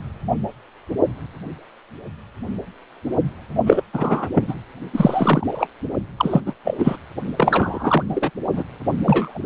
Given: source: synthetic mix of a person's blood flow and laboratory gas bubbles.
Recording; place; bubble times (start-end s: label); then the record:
Doppler ultrasound of blood flow; precordium
3.66-3.82 s: bubbles
3.93-4.28 s: bubbles
4.34-4.55 s: bubbles
4.93-5.47 s: bubbles
5.51-5.67 s: bubbles
6.17-6.41 s: bubbles
6.46-6.54 s: bubbles
6.64-6.96 s: bubbles
7.37-8.03 s: bubbles
8.09-8.30 s: bubbles
8.53-8.64 s: bubbles
9.06-9.39 s: bubbles
From the record:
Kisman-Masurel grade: 233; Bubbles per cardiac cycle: several, 3 to 8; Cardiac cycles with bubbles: 50 to 99%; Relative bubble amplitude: loud (0.450 to 0.775); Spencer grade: 3 (all of the cardiac periods contain showers or single bubble signals, but not dominating or overriding the cardiac motion signals); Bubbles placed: only in the low amplitude regions of the cardiac cycle